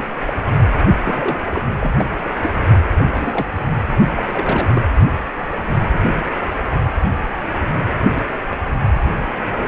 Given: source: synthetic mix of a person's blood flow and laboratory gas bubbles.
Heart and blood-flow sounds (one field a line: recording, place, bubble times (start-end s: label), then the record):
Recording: Doppler ultrasound of blood flow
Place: precordium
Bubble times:
0.00-0.02 s: bubbles
0.25-0.34 s: bubbles
0.46-0.50 s: bubbles
1.03-1.40 s: bubbles
1.50-1.66 s: bubbles
1.76-1.93 s: bubbles
1.97-2.05 s: bubbles
2.43-2.50 s: bubbles
2.93-3.04 s: bubbles
3.08-3.48 s: bubbles
4.16-4.23 s: bubbles
4.31-4.82 s: bubbles
8.15-8.22 s: bubbles
8.50-8.59 s: bubbles
9.45-9.67 s: bubbles
From the record:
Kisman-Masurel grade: 232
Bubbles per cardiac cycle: several, 3 to 8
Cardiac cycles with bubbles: 50 to 99%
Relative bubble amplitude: moderate (0.250 to 0.450)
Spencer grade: 3 (all of the cardiac periods contain showers or single bubble signals, but not dominating or overriding the cardiac motion signals)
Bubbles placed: only in the low amplitude regions of the cardiac cycle